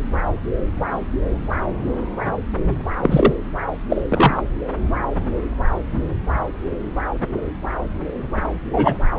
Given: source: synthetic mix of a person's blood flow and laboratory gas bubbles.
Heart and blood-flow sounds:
Doppler ultrasound of blood flow; subclavian vein
3.02-3.33 s: bubbles
3.89-4.01 s: bubbles
4.09-4.42 s: bubbles
8.73-8.95 s: bubbles
From the record:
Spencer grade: 2 (many but less than half of the cardiac periods contain bubble signals, singularly or in groups); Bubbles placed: anywhere in the cardiac cycle

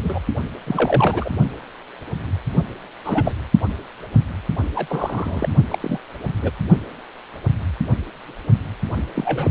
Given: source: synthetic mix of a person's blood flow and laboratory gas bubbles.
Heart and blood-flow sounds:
Doppler ultrasound of blood flow; precordium
0.03-0.21 s: bubbles
0.66-1.30 s: bubbles
3.04-3.31 s: bubbles
4.75-5.49 s: bubbles
5.71-5.79 s: bubbles
5.81-5.98 s: bubbles
6.42-6.51 s: bubbles
9.15-9.51 s: bubbles
From the record:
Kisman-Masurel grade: 232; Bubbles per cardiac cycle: several, 3 to 8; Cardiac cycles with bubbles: 50 to 99%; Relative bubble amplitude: moderate (0.250 to 0.450); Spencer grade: 3 (all of the cardiac periods contain showers or single bubble signals, but not dominating or overriding the cardiac motion signals); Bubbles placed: only in the low amplitude regions of the cardiac cycle

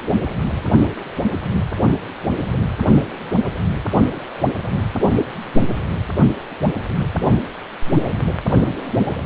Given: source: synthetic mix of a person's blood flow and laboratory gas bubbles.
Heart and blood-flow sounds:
Doppler ultrasound of blood flow; precordium
no bubbles
From the record:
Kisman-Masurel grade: 000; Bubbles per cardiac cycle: 0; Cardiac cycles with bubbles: 0%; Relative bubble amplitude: no bubbles discernible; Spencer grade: 0 (complete lack of bubble signals)

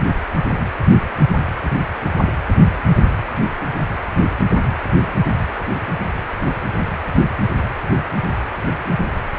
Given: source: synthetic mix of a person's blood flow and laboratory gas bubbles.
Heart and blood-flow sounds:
Doppler ultrasound of blood flow; precordium
no bubbles
From the record:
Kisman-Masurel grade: 000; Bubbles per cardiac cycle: 0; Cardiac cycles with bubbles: 0%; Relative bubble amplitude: no bubbles discernible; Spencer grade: 0 (complete lack of bubble signals)

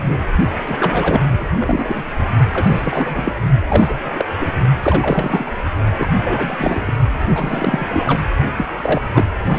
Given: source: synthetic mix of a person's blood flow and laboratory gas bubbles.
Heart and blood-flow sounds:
Doppler ultrasound of blood flow; precordium
0.00-0.23 s: bubbles
0.66-1.49 s: bubbles
1.59-2.07 s: bubbles
2.53-3.38 s: bubbles
3.66-4.11 s: bubbles
4.15-4.25 s: bubbles
4.38-4.53 s: bubbles
4.83-5.54 s: bubbles
5.98-6.08 s: bubbles
6.24-6.92 s: bubbles
7.29-7.87 s: bubbles
7.91-8.03 s: bubbles
8.05-8.22 s: bubbles
8.55-9.02 s: bubbles
9.13-9.25 s: bubbles
9.44-9.59 s: bubbles
From the record:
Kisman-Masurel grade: 333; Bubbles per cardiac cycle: rolling drumbeat, 9 or more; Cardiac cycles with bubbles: 50 to 99%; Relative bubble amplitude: loud (0.450 to 0.775); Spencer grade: 3 (all of the cardiac periods contain showers or single bubble signals, but not dominating or overriding the cardiac motion signals); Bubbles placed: only in the low amplitude regions of the cardiac cycle

